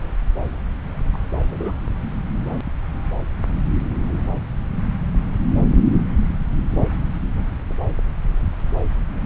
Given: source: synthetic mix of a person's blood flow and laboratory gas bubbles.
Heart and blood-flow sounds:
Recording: Doppler ultrasound of blood flow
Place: subclavian vein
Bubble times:
1.13-1.18 s: bubbles
1.46-1.75 s: bubbles
From the record:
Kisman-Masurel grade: 111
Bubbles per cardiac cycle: 1 to 2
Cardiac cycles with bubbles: 1 to 10%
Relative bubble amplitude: barely perceptible (0.100 to 0.250)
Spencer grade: 1 (occasional bubble signal discernible with the cardiac motion signal, with majority of cardiac periods free of bubbles)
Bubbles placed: anywhere in the cardiac cycle

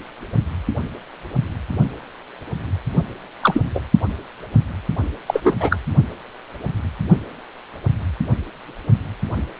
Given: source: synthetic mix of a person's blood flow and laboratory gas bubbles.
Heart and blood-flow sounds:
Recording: Doppler ultrasound of blood flow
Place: precordium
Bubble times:
3.42-3.61 s: bubbles
3.75-3.80 s: bubbles
5.28-5.41 s: bubbles
5.44-5.54 s: bubbles
5.60-5.77 s: bubbles
From the record:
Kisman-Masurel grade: 223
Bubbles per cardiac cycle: several, 3 to 8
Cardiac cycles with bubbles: 10 to 50%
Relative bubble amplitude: loud (0.450 to 0.775)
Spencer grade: 2 (many but less than half of the cardiac periods contain bubble signals, singularly or in groups)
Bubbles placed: only in the low amplitude regions of the cardiac cycle

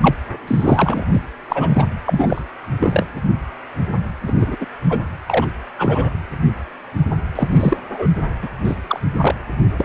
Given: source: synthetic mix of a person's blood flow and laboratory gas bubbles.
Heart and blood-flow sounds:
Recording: Doppler ultrasound of blood flow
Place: precordium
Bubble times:
0.02-0.14 s: bubbles
0.47-1.05 s: bubbles
1.11-1.21 s: bubbles
1.49-1.90 s: bubbles
2.06-2.42 s: bubbles
2.80-3.06 s: bubbles
4.26-4.56 s: bubbles
4.60-4.66 s: bubbles
4.89-5.02 s: bubbles
5.27-5.47 s: bubbles
5.78-6.13 s: bubbles
7.35-7.77 s: bubbles
7.88-8.06 s: bubbles
8.42-8.49 s: bubbles
8.64-8.79 s: bubbles
8.88-9.00 s: bubbles
9.15-9.35 s: bubbles
9.78-9.85 s: bubbles
From the record:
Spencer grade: 3 (all of the cardiac periods contain showers or single bubble signals, but not dominating or overriding the cardiac motion signals)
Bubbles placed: anywhere in the cardiac cycle

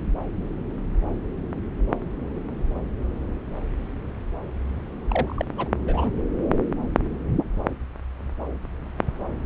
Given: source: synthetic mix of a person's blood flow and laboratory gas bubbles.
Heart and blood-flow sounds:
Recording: Doppler ultrasound of blood flow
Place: subclavian vein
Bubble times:
5.08-5.45 s: bubbles
5.57-5.69 s: bubbles
5.82-6.11 s: bubbles
From the record:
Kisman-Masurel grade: 213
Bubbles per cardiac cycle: several, 3 to 8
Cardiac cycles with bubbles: 1 to 10%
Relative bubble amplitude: loud (0.450 to 0.775)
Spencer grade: 1 (occasional bubble signal discernible with the cardiac motion signal, with majority of cardiac periods free of bubbles)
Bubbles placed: anywhere in the cardiac cycle

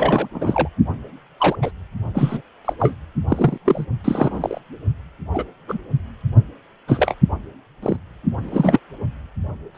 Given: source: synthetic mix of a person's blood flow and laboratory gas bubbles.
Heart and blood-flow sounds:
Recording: Doppler ultrasound of blood flow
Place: precordium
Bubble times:
0.00-0.28 s: bubbles
0.32-0.69 s: bubbles
1.38-1.56 s: bubbles
1.62-1.71 s: bubbles
2.14-2.42 s: bubbles
2.65-2.73 s: bubbles
2.79-2.94 s: bubbles
3.28-3.58 s: bubbles
3.65-3.85 s: bubbles
4.04-4.59 s: bubbles
5.33-5.44 s: bubbles
5.67-5.79 s: bubbles
6.88-7.14 s: bubbles
7.83-7.97 s: bubbles
8.43-8.80 s: bubbles
9.75-9.78 s: bubbles
From the record:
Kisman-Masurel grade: 243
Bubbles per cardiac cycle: several, 3 to 8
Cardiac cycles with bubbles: 100%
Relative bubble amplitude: loud (0.450 to 0.775)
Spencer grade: 3 (all of the cardiac periods contain showers or single bubble signals, but not dominating or overriding the cardiac motion signals)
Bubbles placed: only in the low amplitude regions of the cardiac cycle

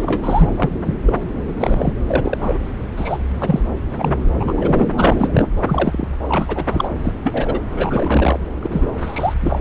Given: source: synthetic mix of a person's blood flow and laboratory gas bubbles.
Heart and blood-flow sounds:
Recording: Doppler ultrasound of blood flow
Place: subclavian vein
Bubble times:
0.00-0.51 s: bubbles
0.56-0.70 s: bubbles
0.86-0.95 s: bubbles
1.06-1.14 s: bubbles
1.60-1.93 s: bubbles
2.06-2.38 s: bubbles
2.40-2.58 s: bubbles
2.96-3.18 s: bubbles
3.40-3.60 s: bubbles
3.96-4.17 s: bubbles
4.40-4.86 s: bubbles
4.97-5.48 s: bubbles
5.64-6.06 s: bubbles
6.27-6.64 s: bubbles
6.70-6.89 s: bubbles
7.03-7.12 s: bubbles
7.23-7.59 s: bubbles
7.75-8.39 s: bubbles
8.62-8.87 s: bubbles
9.01-9.34 s: bubbles
9.40-9.59 s: bubbles
From the record:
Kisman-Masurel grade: 243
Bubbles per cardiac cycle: several, 3 to 8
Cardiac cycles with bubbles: 100%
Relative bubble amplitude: loud (0.450 to 0.775)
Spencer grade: 3 (all of the cardiac periods contain showers or single bubble signals, but not dominating or overriding the cardiac motion signals)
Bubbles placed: anywhere in the cardiac cycle

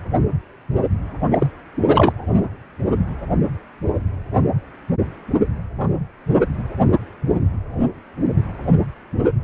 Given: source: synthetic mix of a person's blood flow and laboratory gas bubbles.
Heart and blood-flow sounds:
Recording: Doppler ultrasound of blood flow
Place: precordium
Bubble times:
1.29-1.46 s: bubbles
1.85-2.12 s: bubbles
From the record:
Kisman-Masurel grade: 223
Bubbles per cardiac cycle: several, 3 to 8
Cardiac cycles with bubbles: 10 to 50%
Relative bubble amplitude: loud (0.450 to 0.775)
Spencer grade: 2 (many but less than half of the cardiac periods contain bubble signals, singularly or in groups)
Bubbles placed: anywhere in the cardiac cycle

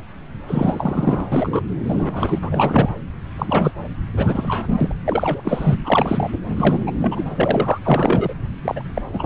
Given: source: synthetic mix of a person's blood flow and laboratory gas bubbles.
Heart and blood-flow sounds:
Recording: Doppler ultrasound of blood flow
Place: subclavian vein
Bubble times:
0.47-1.25 s: bubbles
1.31-1.63 s: bubbles
1.84-2.39 s: bubbles
2.42-2.89 s: bubbles
3.38-3.71 s: bubbles
4.16-4.93 s: bubbles
5.05-5.76 s: bubbles
5.84-6.30 s: bubbles
6.56-6.92 s: bubbles
7.01-7.24 s: bubbles
7.34-7.78 s: bubbles
7.84-8.35 s: bubbles
8.62-8.84 s: bubbles
8.94-9.02 s: bubbles
9.12-9.26 s: bubbles
From the record:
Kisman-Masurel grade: 333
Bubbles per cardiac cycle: rolling drumbeat, 9 or more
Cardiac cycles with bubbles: 50 to 99%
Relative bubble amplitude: loud (0.450 to 0.775)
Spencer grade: 3 (all of the cardiac periods contain showers or single bubble signals, but not dominating or overriding the cardiac motion signals)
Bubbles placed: anywhere in the cardiac cycle

